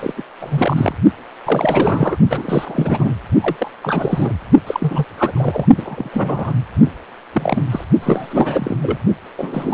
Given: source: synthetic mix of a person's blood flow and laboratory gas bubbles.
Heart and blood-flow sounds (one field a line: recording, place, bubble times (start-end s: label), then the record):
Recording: Doppler ultrasound of blood flow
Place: precordium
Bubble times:
0.00-0.13 s: bubbles
0.17-0.23 s: bubbles
0.40-0.95 s: bubbles
1.45-2.17 s: bubbles
2.29-3.15 s: bubbles
3.41-3.71 s: bubbles
3.83-4.34 s: bubbles
4.67-5.04 s: bubbles
5.17-5.32 s: bubbles
5.35-5.66 s: bubbles
5.77-6.10 s: bubbles
6.12-6.52 s: bubbles
6.85-6.90 s: bubbles
7.33-7.62 s: bubbles
7.70-7.84 s: bubbles
8.01-8.76 s: bubbles
8.81-8.98 s: bubbles
9.38-9.74 s: bubbles
From the record:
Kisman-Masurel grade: 332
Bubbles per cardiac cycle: rolling drumbeat, 9 or more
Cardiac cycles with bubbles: 50 to 99%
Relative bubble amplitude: moderate (0.250 to 0.450)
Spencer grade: 3 (all of the cardiac periods contain showers or single bubble signals, but not dominating or overriding the cardiac motion signals)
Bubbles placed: only in the low amplitude regions of the cardiac cycle